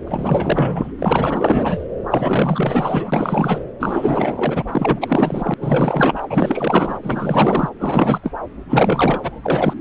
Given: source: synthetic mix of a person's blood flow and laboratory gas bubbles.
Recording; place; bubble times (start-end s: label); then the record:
Doppler ultrasound of blood flow; subclavian vein
0.07-0.91 s: bubbles
0.98-1.85 s: bubbles
2.10-3.61 s: bubbles
3.79-4.64 s: bubbles
4.72-5.54 s: bubbles
5.60-6.99 s: bubbles
7.03-7.70 s: bubbles
7.79-8.31 s: bubbles
8.69-9.74 s: bubbles
From the record:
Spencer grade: 4 (maximum detectable bubble signal sounding continuously throughout systole and diastole of every cardiac period, and overriding the amplitude of the normal cardiac signals); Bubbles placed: anywhere in the cardiac cycle